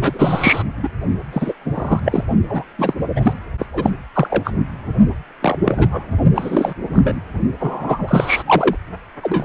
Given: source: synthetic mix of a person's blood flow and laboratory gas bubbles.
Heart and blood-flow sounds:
Doppler ultrasound of blood flow; precordium
0.01-0.63 s: bubbles
0.83-0.88 s: bubbles
1.33-1.53 s: bubbles
1.65-2.00 s: bubbles
2.05-2.25 s: bubbles
2.49-2.65 s: bubbles
2.79-2.94 s: bubbles
3.16-3.33 s: bubbles
3.58-3.66 s: bubbles
3.73-3.91 s: bubbles
4.13-4.53 s: bubbles
5.42-5.58 s: bubbles
5.63-5.88 s: bubbles
5.92-6.04 s: bubbles
6.34-6.74 s: bubbles
6.93-7.20 s: bubbles
7.59-8.43 s: bubbles
8.46-8.76 s: bubbles
9.22-9.45 s: bubbles
From the record:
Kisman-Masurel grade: 243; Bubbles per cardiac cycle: several, 3 to 8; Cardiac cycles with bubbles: 100%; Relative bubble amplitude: loud (0.450 to 0.775); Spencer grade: 3 (all of the cardiac periods contain showers or single bubble signals, but not dominating or overriding the cardiac motion signals); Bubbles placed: only in the low amplitude regions of the cardiac cycle

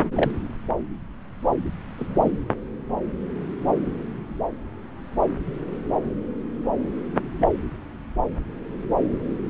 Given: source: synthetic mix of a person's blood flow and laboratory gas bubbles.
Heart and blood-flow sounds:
Doppler ultrasound of blood flow; subclavian vein
0.15-0.30 s: bubbles
1.97-2.31 s: bubbles
7.41-7.49 s: bubbles
From the record:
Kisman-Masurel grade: 122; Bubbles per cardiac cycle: 1 to 2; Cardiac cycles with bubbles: 10 to 50%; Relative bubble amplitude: moderate (0.250 to 0.450); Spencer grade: 2 (many but less than half of the cardiac periods contain bubble signals, singularly or in groups); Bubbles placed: anywhere in the cardiac cycle

